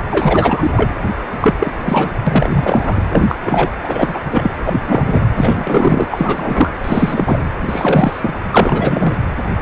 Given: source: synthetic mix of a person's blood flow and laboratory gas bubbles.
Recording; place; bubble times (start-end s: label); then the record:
Doppler ultrasound of blood flow; precordium
0.11-0.95 s: bubbles
1.41-1.54 s: bubbles
1.59-1.72 s: bubbles
1.83-2.12 s: bubbles
2.27-3.04 s: bubbles
3.12-3.73 s: bubbles
3.84-4.21 s: bubbles
4.25-4.50 s: bubbles
4.66-4.80 s: bubbles
4.87-5.25 s: bubbles
5.37-6.08 s: bubbles
6.11-6.71 s: bubbles
6.84-7.46 s: bubbles
7.67-8.33 s: bubbles
8.51-9.14 s: bubbles
From the record:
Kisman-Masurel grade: 343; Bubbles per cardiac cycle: rolling drumbeat, 9 or more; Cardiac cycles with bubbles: 100%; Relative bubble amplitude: loud (0.450 to 0.775); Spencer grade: 3 (all of the cardiac periods contain showers or single bubble signals, but not dominating or overriding the cardiac motion signals); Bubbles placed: anywhere in the cardiac cycle